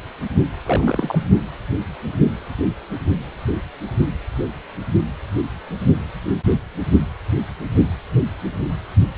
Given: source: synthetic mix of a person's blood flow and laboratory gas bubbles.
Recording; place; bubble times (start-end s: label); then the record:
Doppler ultrasound of blood flow; precordium
0.63-1.28 s: bubbles
From the record:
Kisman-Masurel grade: 212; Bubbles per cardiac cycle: several, 3 to 8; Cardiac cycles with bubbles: 1 to 10%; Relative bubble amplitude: moderate (0.250 to 0.450); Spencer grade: 1 (occasional bubble signal discernible with the cardiac motion signal, with majority of cardiac periods free of bubbles); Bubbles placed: only in the low amplitude regions of the cardiac cycle